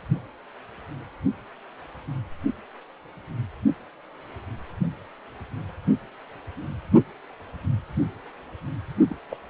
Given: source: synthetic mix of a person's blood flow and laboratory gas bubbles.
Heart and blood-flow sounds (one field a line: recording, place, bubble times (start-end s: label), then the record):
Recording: Doppler ultrasound of blood flow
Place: precordium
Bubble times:
9.08-9.16 s: bubbles
9.31-9.35 s: bubbles
From the record:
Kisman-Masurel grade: 211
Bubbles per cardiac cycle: several, 3 to 8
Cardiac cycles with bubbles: 1 to 10%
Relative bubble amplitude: barely perceptible (0.100 to 0.250)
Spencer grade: 1 (occasional bubble signal discernible with the cardiac motion signal, with majority of cardiac periods free of bubbles)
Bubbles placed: only in the low amplitude regions of the cardiac cycle